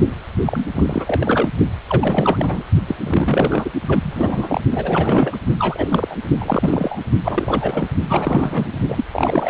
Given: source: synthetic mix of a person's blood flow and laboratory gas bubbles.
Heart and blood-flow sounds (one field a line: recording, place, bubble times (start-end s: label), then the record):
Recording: Doppler ultrasound of blood flow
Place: precordium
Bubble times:
0.45-0.66 s: bubbles
0.74-1.49 s: bubbles
1.88-2.63 s: bubbles
2.86-2.96 s: bubbles
3.00-3.69 s: bubbles
3.88-4.61 s: bubbles
4.70-5.37 s: bubbles
5.58-5.88 s: bubbles
5.91-6.16 s: bubbles
6.40-7.01 s: bubbles
7.24-7.88 s: bubbles
8.09-8.79 s: bubbles
8.88-9.04 s: bubbles
9.12-9.50 s: bubbles
From the record:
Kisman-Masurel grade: 342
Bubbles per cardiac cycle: rolling drumbeat, 9 or more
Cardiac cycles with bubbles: 100%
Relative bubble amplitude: moderate (0.250 to 0.450)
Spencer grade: 3 (all of the cardiac periods contain showers or single bubble signals, but not dominating or overriding the cardiac motion signals)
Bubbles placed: only in the low amplitude regions of the cardiac cycle